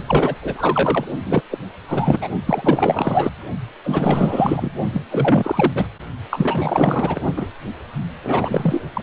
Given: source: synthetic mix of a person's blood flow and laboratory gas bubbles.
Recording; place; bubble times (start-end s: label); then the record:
Doppler ultrasound of blood flow; precordium
0.00-0.03 s: bubbles
0.07-0.36 s: bubbles
0.42-1.05 s: bubbles
1.26-1.42 s: bubbles
1.51-1.58 s: bubbles
1.88-2.28 s: bubbles
2.46-3.31 s: bubbles
3.84-4.71 s: bubbles
4.92-5.02 s: bubbles
5.10-5.88 s: bubbles
6.30-7.21 s: bubbles
7.36-7.48 s: bubbles
8.23-8.83 s: bubbles
8.93-9.01 s: bubbles
From the record:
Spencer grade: 4 (maximum detectable bubble signal sounding continuously throughout systole and diastole of every cardiac period, and overriding the amplitude of the normal cardiac signals); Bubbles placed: only in the low amplitude regions of the cardiac cycle